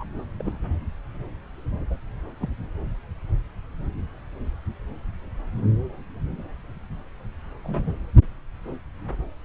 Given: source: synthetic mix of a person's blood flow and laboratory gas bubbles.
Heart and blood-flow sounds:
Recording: Doppler ultrasound of blood flow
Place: subclavian vein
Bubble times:
0.00-0.04 s: bubbles
0.40-0.58 s: bubbles
1.90-1.96 s: bubbles
2.38-2.50 s: bubbles
7.64-7.93 s: bubbles
From the record:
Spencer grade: 2 (many but less than half of the cardiac periods contain bubble signals, singularly or in groups)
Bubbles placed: anywhere in the cardiac cycle

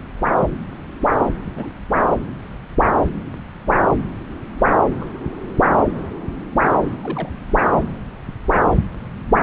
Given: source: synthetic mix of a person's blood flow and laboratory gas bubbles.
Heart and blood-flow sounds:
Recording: Doppler ultrasound of blood flow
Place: subclavian vein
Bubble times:
1.56-1.70 s: bubbles
5.00-5.05 s: bubbles
7.03-7.29 s: bubbles
7.64-7.84 s: bubbles
From the record:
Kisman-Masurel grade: 121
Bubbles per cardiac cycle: 1 to 2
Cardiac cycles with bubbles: 10 to 50%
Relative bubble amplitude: barely perceptible (0.100 to 0.250)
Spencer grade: 2 (many but less than half of the cardiac periods contain bubble signals, singularly or in groups)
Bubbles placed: anywhere in the cardiac cycle

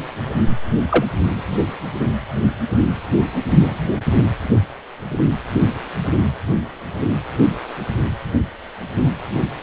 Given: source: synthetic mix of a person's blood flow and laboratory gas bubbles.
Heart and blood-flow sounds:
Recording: Doppler ultrasound of blood flow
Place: precordium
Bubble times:
0.89-1.04 s: bubbles
3.50-3.79 s: bubbles
From the record:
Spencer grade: 2 (many but less than half of the cardiac periods contain bubble signals, singularly or in groups)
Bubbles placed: anywhere in the cardiac cycle

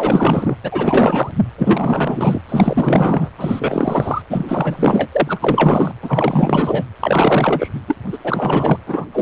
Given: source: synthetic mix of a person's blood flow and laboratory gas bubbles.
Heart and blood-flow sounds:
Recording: Doppler ultrasound of blood flow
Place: precordium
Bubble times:
0.00-0.56 s: bubbles
0.63-1.31 s: bubbles
1.57-2.42 s: bubbles
2.49-3.29 s: bubbles
3.38-4.22 s: bubbles
4.29-4.46 s: bubbles
4.48-5.08 s: bubbles
5.12-5.93 s: bubbles
6.02-6.84 s: bubbles
7.00-7.68 s: bubbles
7.87-7.96 s: bubbles
8.12-8.18 s: bubbles
8.24-8.78 s: bubbles
8.87-9.05 s: bubbles
9.12-9.22 s: bubbles
From the record:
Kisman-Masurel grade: 444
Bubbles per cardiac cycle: continuous sound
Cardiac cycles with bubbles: 100%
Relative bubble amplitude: maximal (0.775 to 0.999)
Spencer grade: 4 (maximum detectable bubble signal sounding continuously throughout systole and diastole of every cardiac period, and overriding the amplitude of the normal cardiac signals)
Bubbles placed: anywhere in the cardiac cycle

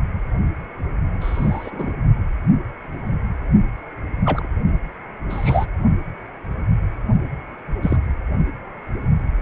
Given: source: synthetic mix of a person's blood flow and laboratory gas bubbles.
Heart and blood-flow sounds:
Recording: Doppler ultrasound of blood flow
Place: precordium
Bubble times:
1.21-1.93 s: bubbles
4.25-4.46 s: bubbles
5.29-5.66 s: bubbles
7.82-7.97 s: bubbles
From the record:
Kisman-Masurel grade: 122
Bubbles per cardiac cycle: 1 to 2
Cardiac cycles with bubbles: 10 to 50%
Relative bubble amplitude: moderate (0.250 to 0.450)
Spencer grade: 2 (many but less than half of the cardiac periods contain bubble signals, singularly or in groups)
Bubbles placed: only in the low amplitude regions of the cardiac cycle

